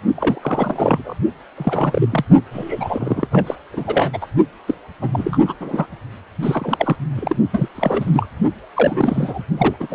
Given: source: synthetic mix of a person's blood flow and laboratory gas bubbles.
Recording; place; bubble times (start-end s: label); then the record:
Doppler ultrasound of blood flow; precordium
0.15-1.15 s: bubbles
1.56-2.25 s: bubbles
2.52-3.27 s: bubbles
3.31-3.56 s: bubbles
3.73-4.27 s: bubbles
4.67-4.75 s: bubbles
5.02-5.38 s: bubbles
5.46-5.55 s: bubbles
5.61-5.88 s: bubbles
6.43-6.96 s: bubbles
7.15-7.37 s: bubbles
7.52-7.69 s: bubbles
7.75-8.28 s: bubbles
8.75-9.43 s: bubbles
9.58-9.77 s: bubbles
9.80-9.95 s: bubbles
From the record:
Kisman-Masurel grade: 343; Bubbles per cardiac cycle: rolling drumbeat, 9 or more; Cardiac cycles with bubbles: 100%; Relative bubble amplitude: loud (0.450 to 0.775); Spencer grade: 3 (all of the cardiac periods contain showers or single bubble signals, but not dominating or overriding the cardiac motion signals); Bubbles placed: only in the low amplitude regions of the cardiac cycle